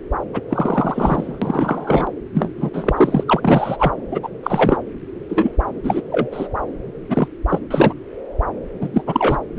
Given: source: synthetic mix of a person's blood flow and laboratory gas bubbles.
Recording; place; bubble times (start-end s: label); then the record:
Doppler ultrasound of blood flow; subclavian vein
0.33-0.41 s: bubbles
0.50-2.08 s: bubbles
2.33-2.50 s: bubbles
2.57-2.70 s: bubbles
2.73-3.23 s: bubbles
3.27-3.93 s: bubbles
4.11-4.19 s: bubbles
4.23-4.29 s: bubbles
4.43-4.79 s: bubbles
5.29-5.53 s: bubbles
5.83-6.01 s: bubbles
6.11-6.28 s: bubbles
6.31-6.48 s: bubbles
7.09-7.27 s: bubbles
7.48-7.59 s: bubbles
7.70-7.93 s: bubbles
8.80-8.89 s: bubbles
8.93-9.04 s: bubbles
9.06-9.39 s: bubbles
9.55-9.59 s: bubbles
From the record:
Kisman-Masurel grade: 233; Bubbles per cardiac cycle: several, 3 to 8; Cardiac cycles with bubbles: 50 to 99%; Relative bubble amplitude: loud (0.450 to 0.775); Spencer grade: 3 (all of the cardiac periods contain showers or single bubble signals, but not dominating or overriding the cardiac motion signals); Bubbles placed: anywhere in the cardiac cycle